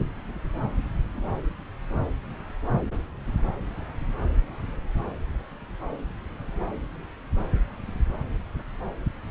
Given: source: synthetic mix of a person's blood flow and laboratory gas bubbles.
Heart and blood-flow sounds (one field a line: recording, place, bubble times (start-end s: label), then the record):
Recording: Doppler ultrasound of blood flow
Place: subclavian vein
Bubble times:
no bubbles
From the record:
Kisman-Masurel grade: 000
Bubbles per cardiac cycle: 0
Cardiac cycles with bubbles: 0%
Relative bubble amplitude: no bubbles discernible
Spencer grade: 0 (complete lack of bubble signals)